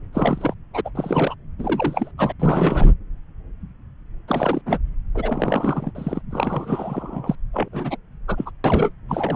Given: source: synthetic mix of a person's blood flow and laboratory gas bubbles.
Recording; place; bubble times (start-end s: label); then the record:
Doppler ultrasound of blood flow; subclavian vein
0.12-0.54 s: bubbles
0.73-0.81 s: bubbles
0.85-0.90 s: bubbles
0.95-1.35 s: bubbles
1.58-2.11 s: bubbles
2.17-2.32 s: bubbles
2.40-2.93 s: bubbles
4.28-4.62 s: bubbles
4.66-4.78 s: bubbles
5.15-5.91 s: bubbles
5.95-6.22 s: bubbles
6.31-7.36 s: bubbles
7.53-7.69 s: bubbles
7.72-7.96 s: bubbles
8.28-8.51 s: bubbles
8.64-8.91 s: bubbles
9.09-9.36 s: bubbles
From the record:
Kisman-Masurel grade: 332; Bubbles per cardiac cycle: rolling drumbeat, 9 or more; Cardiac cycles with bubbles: 50 to 99%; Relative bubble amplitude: moderate (0.250 to 0.450); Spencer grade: 3 (all of the cardiac periods contain showers or single bubble signals, but not dominating or overriding the cardiac motion signals); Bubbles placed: anywhere in the cardiac cycle